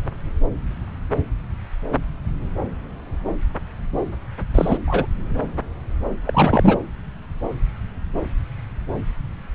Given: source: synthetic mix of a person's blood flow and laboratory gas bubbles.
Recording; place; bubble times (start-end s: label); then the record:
Doppler ultrasound of blood flow; subclavian vein
4.54-4.78 s: bubbles
4.87-5.07 s: bubbles
6.25-6.79 s: bubbles
From the record:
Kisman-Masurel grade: 213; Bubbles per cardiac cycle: several, 3 to 8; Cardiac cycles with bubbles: 1 to 10%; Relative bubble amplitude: loud (0.450 to 0.775); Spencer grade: 1 (occasional bubble signal discernible with the cardiac motion signal, with majority of cardiac periods free of bubbles); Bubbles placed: anywhere in the cardiac cycle